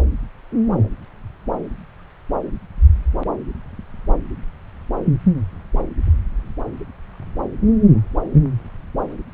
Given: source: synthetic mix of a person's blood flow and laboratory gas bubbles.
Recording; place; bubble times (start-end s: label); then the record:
Doppler ultrasound of blood flow; subclavian vein
no bubbles
From the record:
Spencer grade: 0 (complete lack of bubble signals)